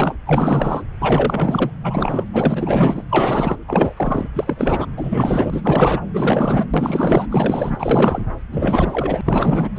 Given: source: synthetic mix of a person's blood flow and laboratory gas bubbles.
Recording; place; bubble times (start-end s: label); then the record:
Doppler ultrasound of blood flow; subclavian vein
0.00-0.15 s: bubbles
0.26-0.83 s: bubbles
0.99-1.70 s: bubbles
1.83-2.24 s: bubbles
2.33-3.05 s: bubbles
3.09-3.57 s: bubbles
3.68-4.28 s: bubbles
4.33-4.86 s: bubbles
4.96-6.01 s: bubbles
6.13-6.65 s: bubbles
6.73-7.26 s: bubbles
7.31-8.22 s: bubbles
8.52-9.21 s: bubbles
9.24-9.70 s: bubbles
9.75-9.79 s: bubbles
From the record:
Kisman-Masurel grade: 444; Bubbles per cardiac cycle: continuous sound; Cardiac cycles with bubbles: 100%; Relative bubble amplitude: maximal (0.775 to 0.999); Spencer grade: 4 (maximum detectable bubble signal sounding continuously throughout systole and diastole of every cardiac period, and overriding the amplitude of the normal cardiac signals); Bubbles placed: anywhere in the cardiac cycle